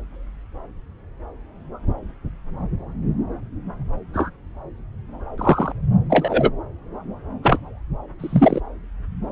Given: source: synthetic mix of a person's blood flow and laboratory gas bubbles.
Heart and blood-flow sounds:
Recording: Doppler ultrasound of blood flow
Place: subclavian vein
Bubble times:
4.13-4.30 s: bubbles
5.38-5.72 s: bubbles
6.09-6.50 s: bubbles
7.42-7.58 s: bubbles
8.19-8.61 s: bubbles
From the record:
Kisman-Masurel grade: 123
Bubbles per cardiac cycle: 1 to 2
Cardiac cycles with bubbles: 10 to 50%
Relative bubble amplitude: loud (0.450 to 0.775)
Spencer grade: 2 (many but less than half of the cardiac periods contain bubble signals, singularly or in groups)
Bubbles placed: anywhere in the cardiac cycle

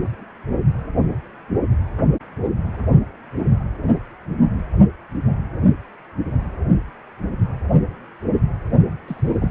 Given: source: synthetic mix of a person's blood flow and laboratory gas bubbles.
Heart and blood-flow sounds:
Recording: Doppler ultrasound of blood flow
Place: precordium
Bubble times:
0.09-0.24 s: bubbles
9.07-9.51 s: bubbles
From the record:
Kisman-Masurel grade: 121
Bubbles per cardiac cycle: 1 to 2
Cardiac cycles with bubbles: 10 to 50%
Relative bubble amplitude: barely perceptible (0.100 to 0.250)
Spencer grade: 2 (many but less than half of the cardiac periods contain bubble signals, singularly or in groups)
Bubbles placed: only in the low amplitude regions of the cardiac cycle

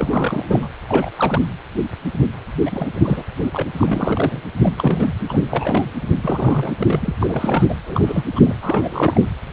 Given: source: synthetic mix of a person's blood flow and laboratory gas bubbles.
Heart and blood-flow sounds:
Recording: Doppler ultrasound of blood flow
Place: precordium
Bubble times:
0.00-0.67 s: bubbles
0.88-1.10 s: bubbles
1.16-1.41 s: bubbles
2.65-2.88 s: bubbles
2.95-3.25 s: bubbles
3.52-3.64 s: bubbles
3.77-4.42 s: bubbles
4.61-4.74 s: bubbles
4.76-5.14 s: bubbles
5.29-5.91 s: bubbles
6.21-7.75 s: bubbles
7.86-8.24 s: bubbles
8.35-8.41 s: bubbles
8.44-8.56 s: bubbles
8.62-9.29 s: bubbles
From the record:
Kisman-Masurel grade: 332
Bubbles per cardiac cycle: rolling drumbeat, 9 or more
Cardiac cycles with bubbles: 50 to 99%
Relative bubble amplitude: moderate (0.250 to 0.450)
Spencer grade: 3 (all of the cardiac periods contain showers or single bubble signals, but not dominating or overriding the cardiac motion signals)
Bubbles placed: anywhere in the cardiac cycle

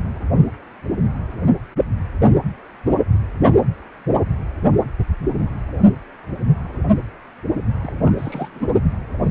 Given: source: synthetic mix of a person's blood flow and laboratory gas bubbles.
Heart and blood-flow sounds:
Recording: Doppler ultrasound of blood flow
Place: precordium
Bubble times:
7.82-7.91 s: bubbles
7.98-8.49 s: bubbles
8.54-8.66 s: bubbles
From the record:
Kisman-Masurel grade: 211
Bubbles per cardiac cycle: several, 3 to 8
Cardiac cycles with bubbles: 1 to 10%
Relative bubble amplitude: barely perceptible (0.100 to 0.250)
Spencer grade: 1 (occasional bubble signal discernible with the cardiac motion signal, with majority of cardiac periods free of bubbles)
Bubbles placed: only in the low amplitude regions of the cardiac cycle

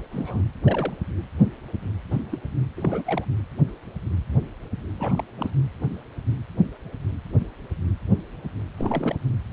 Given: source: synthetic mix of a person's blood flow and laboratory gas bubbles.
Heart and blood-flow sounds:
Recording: Doppler ultrasound of blood flow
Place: precordium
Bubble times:
0.11-0.43 s: bubbles
0.65-0.93 s: bubbles
2.11-2.24 s: bubbles
2.31-2.38 s: bubbles
2.77-3.04 s: bubbles
3.06-3.25 s: bubbles
4.98-5.24 s: bubbles
5.38-5.50 s: bubbles
8.78-9.18 s: bubbles
From the record:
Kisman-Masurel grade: 221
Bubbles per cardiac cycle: several, 3 to 8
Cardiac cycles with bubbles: 10 to 50%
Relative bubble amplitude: barely perceptible (0.100 to 0.250)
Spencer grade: 2 (many but less than half of the cardiac periods contain bubble signals, singularly or in groups)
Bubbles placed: anywhere in the cardiac cycle

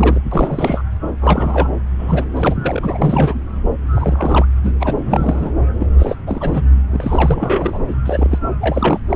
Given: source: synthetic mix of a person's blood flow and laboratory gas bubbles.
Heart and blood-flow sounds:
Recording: Doppler ultrasound of blood flow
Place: subclavian vein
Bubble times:
0.00-0.21 s: bubbles
0.32-0.82 s: bubbles
1.21-1.69 s: bubbles
1.99-2.25 s: bubbles
2.35-3.41 s: bubbles
3.96-4.46 s: bubbles
4.62-4.73 s: bubbles
4.80-4.94 s: bubbles
5.05-5.52 s: bubbles
5.79-5.86 s: bubbles
5.98-6.15 s: bubbles
6.26-6.62 s: bubbles
6.91-7.85 s: bubbles
7.88-7.96 s: bubbles
8.05-8.38 s: bubbles
8.60-9.00 s: bubbles
9.09-9.16 s: bubbles
From the record:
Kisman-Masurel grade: 342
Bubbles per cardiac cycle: rolling drumbeat, 9 or more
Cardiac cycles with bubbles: 100%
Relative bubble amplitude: moderate (0.250 to 0.450)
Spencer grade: 3 (all of the cardiac periods contain showers or single bubble signals, but not dominating or overriding the cardiac motion signals)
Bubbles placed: anywhere in the cardiac cycle

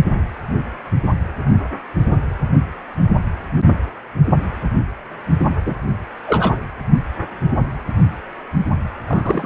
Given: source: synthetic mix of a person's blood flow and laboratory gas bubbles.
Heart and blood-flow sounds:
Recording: Doppler ultrasound of blood flow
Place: precordium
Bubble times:
5.65-5.76 s: bubbles
6.27-6.53 s: bubbles
9.07-9.46 s: bubbles
From the record:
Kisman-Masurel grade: 222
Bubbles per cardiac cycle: several, 3 to 8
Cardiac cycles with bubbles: 10 to 50%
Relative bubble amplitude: moderate (0.250 to 0.450)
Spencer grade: 2 (many but less than half of the cardiac periods contain bubble signals, singularly or in groups)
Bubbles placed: anywhere in the cardiac cycle

